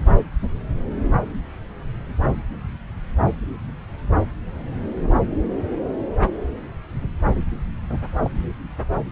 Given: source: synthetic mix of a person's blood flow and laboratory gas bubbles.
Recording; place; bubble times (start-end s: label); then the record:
Doppler ultrasound of blood flow; subclavian vein
7.89-7.97 s: bubbles
8.23-8.32 s: bubbles
From the record:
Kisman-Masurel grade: 111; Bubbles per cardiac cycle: 1 to 2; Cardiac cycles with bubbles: 1 to 10%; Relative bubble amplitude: barely perceptible (0.100 to 0.250); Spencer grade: 1 (occasional bubble signal discernible with the cardiac motion signal, with majority of cardiac periods free of bubbles); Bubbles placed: anywhere in the cardiac cycle